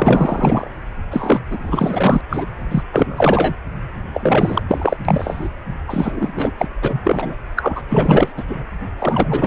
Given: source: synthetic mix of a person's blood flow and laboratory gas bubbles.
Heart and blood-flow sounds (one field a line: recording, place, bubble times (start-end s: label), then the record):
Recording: Doppler ultrasound of blood flow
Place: precordium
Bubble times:
0.00-0.69 s: bubbles
1.10-1.40 s: bubbles
1.50-2.21 s: bubbles
2.29-2.46 s: bubbles
2.71-2.83 s: bubbles
2.92-3.56 s: bubbles
4.14-4.62 s: bubbles
4.68-4.96 s: bubbles
5.04-5.48 s: bubbles
5.88-6.33 s: bubbles
6.35-6.52 s: bubbles
6.58-6.68 s: bubbles
6.82-7.02 s: bubbles
7.04-7.37 s: bubbles
7.56-7.82 s: bubbles
7.88-8.32 s: bubbles
8.37-8.44 s: bubbles
8.47-8.63 s: bubbles
8.98-9.47 s: bubbles
From the record:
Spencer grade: 4 (maximum detectable bubble signal sounding continuously throughout systole and diastole of every cardiac period, and overriding the amplitude of the normal cardiac signals)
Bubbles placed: only in the low amplitude regions of the cardiac cycle